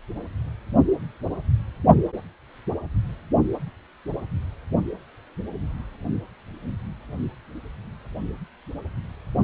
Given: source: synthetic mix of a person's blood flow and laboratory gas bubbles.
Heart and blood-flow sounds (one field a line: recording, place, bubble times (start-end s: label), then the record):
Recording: Doppler ultrasound of blood flow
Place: precordium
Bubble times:
no bubbles
From the record:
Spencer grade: 0 (complete lack of bubble signals)